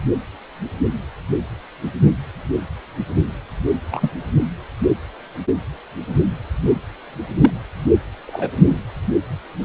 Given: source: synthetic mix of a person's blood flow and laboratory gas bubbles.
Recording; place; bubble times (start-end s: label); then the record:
Doppler ultrasound of blood flow; precordium
3.92-4.11 s: bubbles
7.41-7.50 s: bubbles
8.26-8.51 s: bubbles
8.56-8.81 s: bubbles
From the record:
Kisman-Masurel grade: 122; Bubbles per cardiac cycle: 1 to 2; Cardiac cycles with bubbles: 10 to 50%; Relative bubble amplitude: moderate (0.250 to 0.450); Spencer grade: 2 (many but less than half of the cardiac periods contain bubble signals, singularly or in groups); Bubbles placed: anywhere in the cardiac cycle